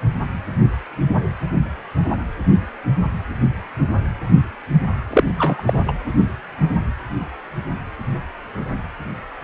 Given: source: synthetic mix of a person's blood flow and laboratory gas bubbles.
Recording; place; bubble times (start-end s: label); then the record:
Doppler ultrasound of blood flow; precordium
5.10-5.24 s: bubbles
5.38-5.62 s: bubbles
5.66-5.82 s: bubbles
5.87-5.92 s: bubbles
From the record:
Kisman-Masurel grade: 213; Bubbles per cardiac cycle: several, 3 to 8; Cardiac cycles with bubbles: 1 to 10%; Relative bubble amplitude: loud (0.450 to 0.775); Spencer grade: 1 (occasional bubble signal discernible with the cardiac motion signal, with majority of cardiac periods free of bubbles); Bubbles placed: anywhere in the cardiac cycle